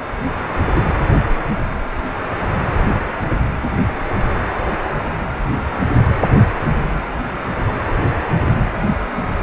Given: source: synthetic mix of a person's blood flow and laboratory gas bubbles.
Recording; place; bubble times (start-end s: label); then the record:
Doppler ultrasound of blood flow; precordium
0.75-0.80 s: bubbles
From the record:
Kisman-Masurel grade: 113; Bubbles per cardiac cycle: 1 to 2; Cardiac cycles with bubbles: 1 to 10%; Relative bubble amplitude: loud (0.450 to 0.775); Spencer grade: 1 (occasional bubble signal discernible with the cardiac motion signal, with majority of cardiac periods free of bubbles); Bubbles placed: anywhere in the cardiac cycle